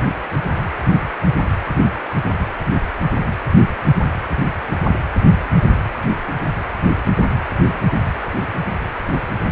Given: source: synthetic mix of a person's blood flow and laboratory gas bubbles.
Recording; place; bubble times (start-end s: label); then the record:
Doppler ultrasound of blood flow; precordium
no bubbles
From the record:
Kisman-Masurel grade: 000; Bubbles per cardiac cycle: 0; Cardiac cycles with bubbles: 0%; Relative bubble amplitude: no bubbles discernible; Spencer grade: 0 (complete lack of bubble signals)